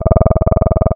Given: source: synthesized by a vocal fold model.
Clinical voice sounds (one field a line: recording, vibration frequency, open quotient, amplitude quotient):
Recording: sustained vowel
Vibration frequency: 20 Hz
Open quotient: 0.2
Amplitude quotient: 1.3